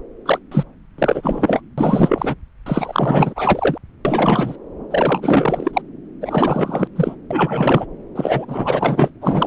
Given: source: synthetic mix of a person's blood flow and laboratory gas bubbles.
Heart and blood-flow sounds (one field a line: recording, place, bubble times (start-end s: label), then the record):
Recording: Doppler ultrasound of blood flow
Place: subclavian vein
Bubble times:
0.25-0.39 s: bubbles
0.51-0.65 s: bubbles
0.98-1.61 s: bubbles
1.77-2.34 s: bubbles
2.66-3.78 s: bubbles
4.05-4.56 s: bubbles
4.91-5.82 s: bubbles
6.21-6.88 s: bubbles
6.96-7.16 s: bubbles
7.31-7.86 s: bubbles
8.15-9.11 s: bubbles
9.21-9.47 s: bubbles
From the record:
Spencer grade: 4 (maximum detectable bubble signal sounding continuously throughout systole and diastole of every cardiac period, and overriding the amplitude of the normal cardiac signals)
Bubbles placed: anywhere in the cardiac cycle